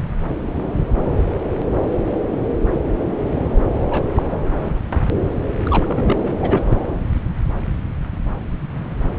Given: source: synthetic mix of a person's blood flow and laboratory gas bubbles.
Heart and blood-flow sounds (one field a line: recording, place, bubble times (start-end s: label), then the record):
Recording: Doppler ultrasound of blood flow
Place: subclavian vein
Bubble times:
3.90-4.02 s: bubbles
4.15-4.22 s: bubbles
5.63-6.38 s: bubbles
6.42-6.63 s: bubbles
6.69-6.76 s: bubbles
From the record:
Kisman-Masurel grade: 222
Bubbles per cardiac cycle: several, 3 to 8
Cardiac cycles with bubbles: 10 to 50%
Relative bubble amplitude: moderate (0.250 to 0.450)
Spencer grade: 2 (many but less than half of the cardiac periods contain bubble signals, singularly or in groups)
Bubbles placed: anywhere in the cardiac cycle